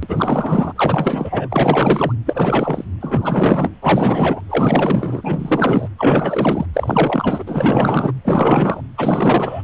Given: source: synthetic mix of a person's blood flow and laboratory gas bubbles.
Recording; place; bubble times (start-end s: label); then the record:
Doppler ultrasound of blood flow; precordium
0.03-0.73 s: bubbles
0.75-2.13 s: bubbles
2.25-2.84 s: bubbles
3.00-3.71 s: bubbles
3.81-4.41 s: bubbles
4.49-5.89 s: bubbles
5.98-6.66 s: bubbles
6.74-7.44 s: bubbles
7.46-8.12 s: bubbles
8.24-8.80 s: bubbles
8.97-9.62 s: bubbles
From the record:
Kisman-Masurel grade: 444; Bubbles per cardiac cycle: continuous sound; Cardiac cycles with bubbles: 100%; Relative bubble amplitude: maximal (0.775 to 0.999); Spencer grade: 4 (maximum detectable bubble signal sounding continuously throughout systole and diastole of every cardiac period, and overriding the amplitude of the normal cardiac signals); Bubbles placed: anywhere in the cardiac cycle